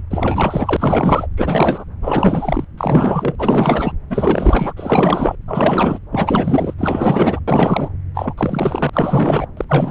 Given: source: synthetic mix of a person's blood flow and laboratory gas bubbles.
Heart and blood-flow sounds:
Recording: Doppler ultrasound of blood flow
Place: subclavian vein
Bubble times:
0.10-1.27 s: bubbles
1.36-1.84 s: bubbles
2.01-2.65 s: bubbles
2.77-3.35 s: bubbles
3.38-3.92 s: bubbles
4.09-4.73 s: bubbles
4.76-5.35 s: bubbles
5.47-5.99 s: bubbles
6.11-6.74 s: bubbles
6.78-7.39 s: bubbles
7.47-7.88 s: bubbles
8.14-8.34 s: bubbles
8.37-8.89 s: bubbles
8.93-9.46 s: bubbles
9.57-9.64 s: bubbles
9.69-9.90 s: bubbles
From the record:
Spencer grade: 4 (maximum detectable bubble signal sounding continuously throughout systole and diastole of every cardiac period, and overriding the amplitude of the normal cardiac signals)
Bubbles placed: anywhere in the cardiac cycle

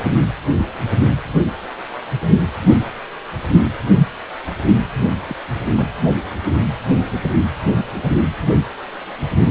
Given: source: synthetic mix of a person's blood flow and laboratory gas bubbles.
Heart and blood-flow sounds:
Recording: Doppler ultrasound of blood flow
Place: precordium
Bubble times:
5.28-5.36 s: bubbles
5.77-5.85 s: bubbles
From the record:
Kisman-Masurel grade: 111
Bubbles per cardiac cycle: 1 to 2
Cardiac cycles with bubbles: 1 to 10%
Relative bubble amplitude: barely perceptible (0.100 to 0.250)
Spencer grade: 1 (occasional bubble signal discernible with the cardiac motion signal, with majority of cardiac periods free of bubbles)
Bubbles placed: anywhere in the cardiac cycle

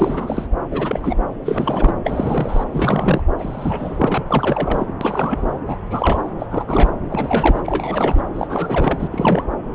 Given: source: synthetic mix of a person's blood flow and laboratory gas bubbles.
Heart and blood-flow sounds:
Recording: Doppler ultrasound of blood flow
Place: subclavian vein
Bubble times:
0.00-0.47 s: bubbles
0.70-1.15 s: bubbles
1.43-1.94 s: bubbles
2.04-2.64 s: bubbles
2.72-3.23 s: bubbles
3.39-4.22 s: bubbles
4.27-4.94 s: bubbles
5.01-5.59 s: bubbles
5.67-5.76 s: bubbles
5.90-6.30 s: bubbles
6.39-6.46 s: bubbles
6.50-6.64 s: bubbles
6.67-6.92 s: bubbles
7.09-7.61 s: bubbles
7.64-8.21 s: bubbles
8.34-9.08 s: bubbles
9.12-9.60 s: bubbles
From the record:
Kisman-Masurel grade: 342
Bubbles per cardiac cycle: rolling drumbeat, 9 or more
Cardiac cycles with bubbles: 100%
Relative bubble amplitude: moderate (0.250 to 0.450)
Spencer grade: 3 (all of the cardiac periods contain showers or single bubble signals, but not dominating or overriding the cardiac motion signals)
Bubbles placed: anywhere in the cardiac cycle

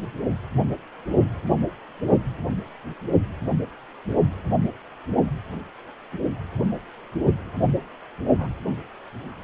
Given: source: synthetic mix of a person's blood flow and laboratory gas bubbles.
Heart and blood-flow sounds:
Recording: Doppler ultrasound of blood flow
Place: precordium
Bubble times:
8.39-8.48 s: bubbles
From the record:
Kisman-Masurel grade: 111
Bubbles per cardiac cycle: 1 to 2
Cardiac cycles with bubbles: 1 to 10%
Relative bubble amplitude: barely perceptible (0.100 to 0.250)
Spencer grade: 1 (occasional bubble signal discernible with the cardiac motion signal, with majority of cardiac periods free of bubbles)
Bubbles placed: only in the low amplitude regions of the cardiac cycle

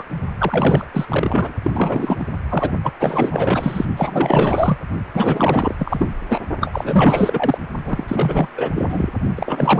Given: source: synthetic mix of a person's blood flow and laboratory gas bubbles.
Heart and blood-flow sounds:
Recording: Doppler ultrasound of blood flow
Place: precordium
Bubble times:
0.00-0.03 s: bubbles
0.38-0.85 s: bubbles
0.93-1.06 s: bubbles
1.08-1.54 s: bubbles
1.63-1.71 s: bubbles
1.74-2.25 s: bubbles
2.48-2.72 s: bubbles
2.83-2.92 s: bubbles
3.00-3.85 s: bubbles
3.97-4.77 s: bubbles
5.14-5.76 s: bubbles
5.79-6.07 s: bubbles
6.28-6.40 s: bubbles
6.61-7.58 s: bubbles
7.84-8.04 s: bubbles
8.07-8.48 s: bubbles
8.56-8.72 s: bubbles
8.75-9.10 s: bubbles
9.35-9.80 s: bubbles
From the record:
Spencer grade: 4 (maximum detectable bubble signal sounding continuously throughout systole and diastole of every cardiac period, and overriding the amplitude of the normal cardiac signals)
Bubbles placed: only in the low amplitude regions of the cardiac cycle

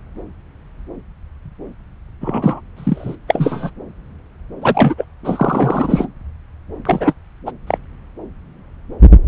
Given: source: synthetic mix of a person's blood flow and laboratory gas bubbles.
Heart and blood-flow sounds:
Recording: Doppler ultrasound of blood flow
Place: subclavian vein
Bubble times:
2.21-2.61 s: bubbles
2.77-3.16 s: bubbles
3.27-3.71 s: bubbles
4.62-4.95 s: bubbles
4.97-5.05 s: bubbles
5.24-6.08 s: bubbles
6.85-7.14 s: bubbles
7.46-7.51 s: bubbles
7.67-7.77 s: bubbles
From the record:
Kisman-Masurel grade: 223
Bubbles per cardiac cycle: several, 3 to 8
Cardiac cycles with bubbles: 10 to 50%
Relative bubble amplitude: loud (0.450 to 0.775)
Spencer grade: 2 (many but less than half of the cardiac periods contain bubble signals, singularly or in groups)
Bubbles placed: anywhere in the cardiac cycle

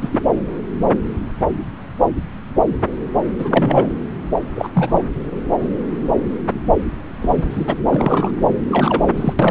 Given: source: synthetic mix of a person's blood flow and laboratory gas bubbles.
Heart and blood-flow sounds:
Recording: Doppler ultrasound of blood flow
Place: subclavian vein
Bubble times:
0.01-0.09 s: bubbles
0.12-0.20 s: bubbles
3.39-3.88 s: bubbles
4.55-4.68 s: bubbles
4.74-5.03 s: bubbles
7.20-7.75 s: bubbles
7.85-8.31 s: bubbles
8.71-9.33 s: bubbles
9.39-9.51 s: bubbles
From the record:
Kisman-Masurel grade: 223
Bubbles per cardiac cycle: several, 3 to 8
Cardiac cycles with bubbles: 10 to 50%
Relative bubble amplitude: loud (0.450 to 0.775)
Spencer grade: 2 (many but less than half of the cardiac periods contain bubble signals, singularly or in groups)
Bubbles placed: anywhere in the cardiac cycle

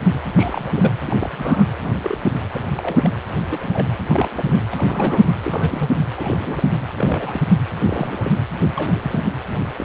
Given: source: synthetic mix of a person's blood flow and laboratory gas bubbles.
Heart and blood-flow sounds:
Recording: Doppler ultrasound of blood flow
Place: precordium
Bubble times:
0.39-0.93 s: bubbles
1.06-1.65 s: bubbles
1.79-2.17 s: bubbles
2.53-2.66 s: bubbles
2.75-3.17 s: bubbles
3.50-3.88 s: bubbles
4.09-4.61 s: bubbles
4.71-5.36 s: bubbles
5.45-5.90 s: bubbles
6.17-6.72 s: bubbles
6.98-7.42 s: bubbles
7.88-8.30 s: bubbles
8.76-9.00 s: bubbles
9.03-9.25 s: bubbles
9.59-9.65 s: bubbles
9.78-9.85 s: bubbles
From the record:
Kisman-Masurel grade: 232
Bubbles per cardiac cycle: several, 3 to 8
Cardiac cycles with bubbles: 50 to 99%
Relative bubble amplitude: moderate (0.250 to 0.450)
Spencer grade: 3 (all of the cardiac periods contain showers or single bubble signals, but not dominating or overriding the cardiac motion signals)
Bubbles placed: anywhere in the cardiac cycle

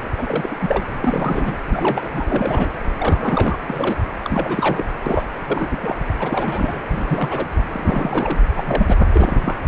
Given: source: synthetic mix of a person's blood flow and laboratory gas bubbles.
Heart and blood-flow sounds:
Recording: Doppler ultrasound of blood flow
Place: precordium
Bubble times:
0.00-0.08 s: bubbles
0.17-0.56 s: bubbles
0.59-0.85 s: bubbles
1.03-1.55 s: bubbles
1.68-2.71 s: bubbles
2.97-3.57 s: bubbles
3.63-3.96 s: bubbles
4.22-4.84 s: bubbles
5.06-5.23 s: bubbles
5.46-5.67 s: bubbles
5.71-5.96 s: bubbles
6.19-6.82 s: bubbles
6.91-7.49 s: bubbles
7.72-8.38 s: bubbles
8.56-8.96 s: bubbles
9.12-9.57 s: bubbles
From the record:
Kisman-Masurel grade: 342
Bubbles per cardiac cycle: rolling drumbeat, 9 or more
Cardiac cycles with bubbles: 100%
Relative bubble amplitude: moderate (0.250 to 0.450)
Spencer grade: 3 (all of the cardiac periods contain showers or single bubble signals, but not dominating or overriding the cardiac motion signals)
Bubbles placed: anywhere in the cardiac cycle

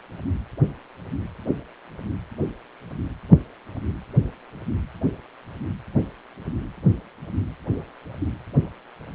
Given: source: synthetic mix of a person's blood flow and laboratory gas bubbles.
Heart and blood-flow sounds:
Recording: Doppler ultrasound of blood flow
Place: precordium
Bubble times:
no bubbles
From the record:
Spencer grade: 0 (complete lack of bubble signals)

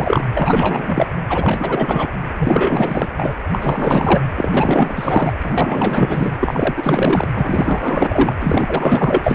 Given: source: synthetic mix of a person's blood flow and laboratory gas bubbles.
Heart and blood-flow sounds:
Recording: Doppler ultrasound of blood flow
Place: precordium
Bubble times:
0.00-0.26 s: bubbles
0.34-1.09 s: bubbles
1.29-2.16 s: bubbles
2.38-3.07 s: bubbles
3.17-3.33 s: bubbles
3.52-4.21 s: bubbles
4.37-5.34 s: bubbles
5.42-6.33 s: bubbles
6.40-7.26 s: bubbles
7.34-8.33 s: bubbles
8.39-9.35 s: bubbles
From the record:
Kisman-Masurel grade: 444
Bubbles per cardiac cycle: continuous sound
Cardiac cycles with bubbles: 100%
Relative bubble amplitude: maximal (0.775 to 0.999)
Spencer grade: 4 (maximum detectable bubble signal sounding continuously throughout systole and diastole of every cardiac period, and overriding the amplitude of the normal cardiac signals)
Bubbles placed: anywhere in the cardiac cycle

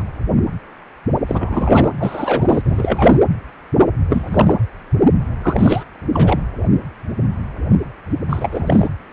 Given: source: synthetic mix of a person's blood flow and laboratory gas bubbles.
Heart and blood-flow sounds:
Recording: Doppler ultrasound of blood flow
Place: precordium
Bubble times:
0.00-0.04 s: bubbles
1.27-1.92 s: bubbles
1.98-3.21 s: bubbles
4.09-4.57 s: bubbles
5.42-5.83 s: bubbles
6.13-6.42 s: bubbles
8.29-8.88 s: bubbles
From the record:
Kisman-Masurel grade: 333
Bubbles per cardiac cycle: rolling drumbeat, 9 or more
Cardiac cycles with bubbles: 50 to 99%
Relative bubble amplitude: loud (0.450 to 0.775)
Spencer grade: 3 (all of the cardiac periods contain showers or single bubble signals, but not dominating or overriding the cardiac motion signals)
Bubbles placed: anywhere in the cardiac cycle

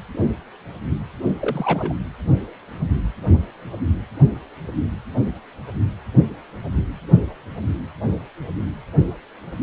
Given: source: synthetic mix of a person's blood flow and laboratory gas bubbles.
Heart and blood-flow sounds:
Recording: Doppler ultrasound of blood flow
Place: precordium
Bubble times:
1.40-1.94 s: bubbles
From the record:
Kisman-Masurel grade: 212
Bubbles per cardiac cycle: several, 3 to 8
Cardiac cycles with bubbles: 1 to 10%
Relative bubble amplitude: moderate (0.250 to 0.450)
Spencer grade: 1 (occasional bubble signal discernible with the cardiac motion signal, with majority of cardiac periods free of bubbles)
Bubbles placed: anywhere in the cardiac cycle

